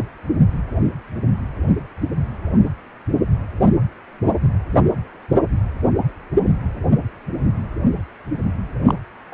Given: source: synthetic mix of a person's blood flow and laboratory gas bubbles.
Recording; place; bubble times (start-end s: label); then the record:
Doppler ultrasound of blood flow; precordium
8.86-8.95 s: bubbles
9.31-9.34 s: bubbles
From the record:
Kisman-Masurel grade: 122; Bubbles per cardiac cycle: 1 to 2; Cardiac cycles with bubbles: 10 to 50%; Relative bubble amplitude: moderate (0.250 to 0.450); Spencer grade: 2 (many but less than half of the cardiac periods contain bubble signals, singularly or in groups); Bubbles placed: anywhere in the cardiac cycle